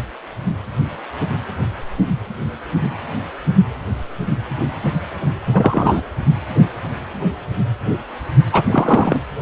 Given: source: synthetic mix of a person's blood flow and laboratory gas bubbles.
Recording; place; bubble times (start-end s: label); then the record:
Doppler ultrasound of blood flow; precordium
5.52-6.03 s: bubbles
8.52-8.62 s: bubbles
8.71-9.21 s: bubbles
From the record:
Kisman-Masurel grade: 213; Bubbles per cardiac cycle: several, 3 to 8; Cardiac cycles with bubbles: 1 to 10%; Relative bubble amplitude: loud (0.450 to 0.775); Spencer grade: 1 (occasional bubble signal discernible with the cardiac motion signal, with majority of cardiac periods free of bubbles); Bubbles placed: anywhere in the cardiac cycle